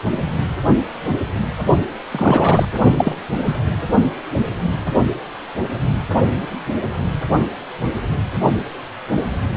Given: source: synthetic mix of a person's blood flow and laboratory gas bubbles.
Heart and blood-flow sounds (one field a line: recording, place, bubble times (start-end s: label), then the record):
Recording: Doppler ultrasound of blood flow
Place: precordium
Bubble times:
2.11-2.65 s: bubbles
2.98-3.16 s: bubbles
3.45-3.58 s: bubbles
From the record:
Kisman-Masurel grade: 223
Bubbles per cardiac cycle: several, 3 to 8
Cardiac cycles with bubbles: 10 to 50%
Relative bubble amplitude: loud (0.450 to 0.775)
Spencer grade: 2 (many but less than half of the cardiac periods contain bubble signals, singularly or in groups)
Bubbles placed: only in the low amplitude regions of the cardiac cycle